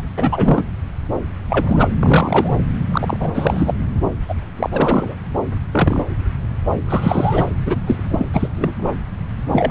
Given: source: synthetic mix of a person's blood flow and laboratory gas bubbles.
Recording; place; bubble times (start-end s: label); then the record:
Doppler ultrasound of blood flow; subclavian vein
0.00-0.02 s: bubbles
0.18-0.66 s: bubbles
1.49-1.88 s: bubbles
2.00-2.54 s: bubbles
2.92-3.17 s: bubbles
3.20-3.73 s: bubbles
4.28-4.34 s: bubbles
4.56-4.69 s: bubbles
4.72-5.14 s: bubbles
5.72-6.05 s: bubbles
6.88-7.44 s: bubbles
7.65-7.81 s: bubbles
7.86-8.48 s: bubbles
8.56-8.72 s: bubbles
8.78-8.96 s: bubbles
9.47-9.71 s: bubbles
From the record:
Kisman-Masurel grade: 233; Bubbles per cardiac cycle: several, 3 to 8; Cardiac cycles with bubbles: 50 to 99%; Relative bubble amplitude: loud (0.450 to 0.775); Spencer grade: 3 (all of the cardiac periods contain showers or single bubble signals, but not dominating or overriding the cardiac motion signals); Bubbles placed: anywhere in the cardiac cycle